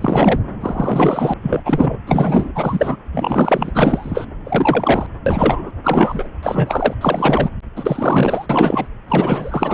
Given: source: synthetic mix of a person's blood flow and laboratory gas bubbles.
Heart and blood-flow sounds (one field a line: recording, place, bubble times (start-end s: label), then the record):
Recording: Doppler ultrasound of blood flow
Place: subclavian vein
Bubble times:
0.00-0.40 s: bubbles
0.60-1.34 s: bubbles
1.42-1.61 s: bubbles
1.65-1.98 s: bubbles
2.06-2.52 s: bubbles
2.55-2.96 s: bubbles
3.11-3.72 s: bubbles
3.75-4.26 s: bubbles
4.45-5.07 s: bubbles
5.26-5.71 s: bubbles
5.83-6.28 s: bubbles
6.43-6.94 s: bubbles
7.01-7.49 s: bubbles
7.76-8.46 s: bubbles
8.49-8.88 s: bubbles
9.08-9.74 s: bubbles
From the record:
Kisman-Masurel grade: 343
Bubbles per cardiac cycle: rolling drumbeat, 9 or more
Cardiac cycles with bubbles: 100%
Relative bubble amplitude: loud (0.450 to 0.775)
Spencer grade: 3 (all of the cardiac periods contain showers or single bubble signals, but not dominating or overriding the cardiac motion signals)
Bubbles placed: anywhere in the cardiac cycle